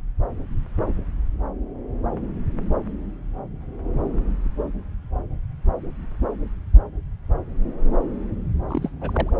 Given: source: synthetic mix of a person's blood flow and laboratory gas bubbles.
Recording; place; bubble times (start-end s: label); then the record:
Doppler ultrasound of blood flow; subclavian vein
8.70-8.89 s: bubbles
9.01-9.10 s: bubbles
9.13-9.32 s: bubbles
From the record:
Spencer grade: 1 (occasional bubble signal discernible with the cardiac motion signal, with majority of cardiac periods free of bubbles); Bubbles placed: anywhere in the cardiac cycle